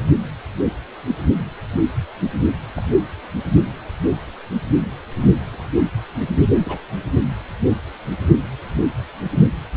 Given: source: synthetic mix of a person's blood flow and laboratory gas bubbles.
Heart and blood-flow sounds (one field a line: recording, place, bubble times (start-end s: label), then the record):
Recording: Doppler ultrasound of blood flow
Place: precordium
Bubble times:
2.75-2.88 s: bubbles
3.56-3.65 s: bubbles
6.58-6.79 s: bubbles
From the record:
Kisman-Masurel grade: 121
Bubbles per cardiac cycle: 1 to 2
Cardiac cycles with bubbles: 10 to 50%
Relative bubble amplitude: barely perceptible (0.100 to 0.250)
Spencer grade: 2 (many but less than half of the cardiac periods contain bubble signals, singularly or in groups)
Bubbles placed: anywhere in the cardiac cycle